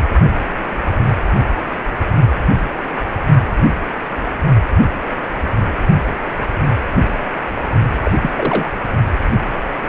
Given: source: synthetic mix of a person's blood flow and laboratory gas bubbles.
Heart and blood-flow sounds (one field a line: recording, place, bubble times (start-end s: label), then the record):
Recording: Doppler ultrasound of blood flow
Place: precordium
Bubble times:
8.05-8.12 s: bubbles
8.22-8.31 s: bubbles
8.37-8.69 s: bubbles
From the record:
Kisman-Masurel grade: 222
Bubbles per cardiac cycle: several, 3 to 8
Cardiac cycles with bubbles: 10 to 50%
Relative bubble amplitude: moderate (0.250 to 0.450)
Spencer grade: 2 (many but less than half of the cardiac periods contain bubble signals, singularly or in groups)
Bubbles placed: only in the low amplitude regions of the cardiac cycle